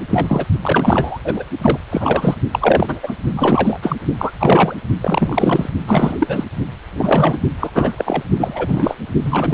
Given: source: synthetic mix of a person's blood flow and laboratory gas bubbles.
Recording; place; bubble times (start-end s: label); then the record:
Doppler ultrasound of blood flow; precordium
0.09-0.45 s: bubbles
0.61-1.18 s: bubbles
1.24-1.44 s: bubbles
1.62-1.78 s: bubbles
1.91-2.35 s: bubbles
2.52-3.00 s: bubbles
3.03-3.14 s: bubbles
3.31-3.78 s: bubbles
3.82-3.97 s: bubbles
4.18-4.31 s: bubbles
4.39-4.76 s: bubbles
5.00-5.69 s: bubbles
5.86-6.44 s: bubbles
6.92-7.39 s: bubbles
7.59-7.70 s: bubbles
7.74-8.23 s: bubbles
8.38-8.95 s: bubbles
9.23-9.54 s: bubbles
From the record:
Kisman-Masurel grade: 343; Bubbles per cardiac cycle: rolling drumbeat, 9 or more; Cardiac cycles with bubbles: 100%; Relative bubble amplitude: loud (0.450 to 0.775); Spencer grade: 3 (all of the cardiac periods contain showers or single bubble signals, but not dominating or overriding the cardiac motion signals); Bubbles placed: only in the low amplitude regions of the cardiac cycle